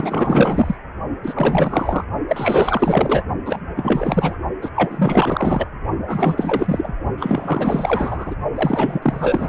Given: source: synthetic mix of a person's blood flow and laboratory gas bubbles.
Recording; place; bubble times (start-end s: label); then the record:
Doppler ultrasound of blood flow; precordium
0.00-0.78 s: bubbles
1.23-2.05 s: bubbles
2.28-3.24 s: bubbles
3.45-3.60 s: bubbles
3.76-4.38 s: bubbles
4.61-4.69 s: bubbles
4.75-5.67 s: bubbles
6.06-6.92 s: bubbles
7.17-8.36 s: bubbles
8.54-9.00 s: bubbles
9.02-9.49 s: bubbles
From the record:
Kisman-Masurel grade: 444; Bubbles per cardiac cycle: continuous sound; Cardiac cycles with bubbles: 100%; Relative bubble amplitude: maximal (0.775 to 0.999); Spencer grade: 4 (maximum detectable bubble signal sounding continuously throughout systole and diastole of every cardiac period, and overriding the amplitude of the normal cardiac signals); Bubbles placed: only in the low amplitude regions of the cardiac cycle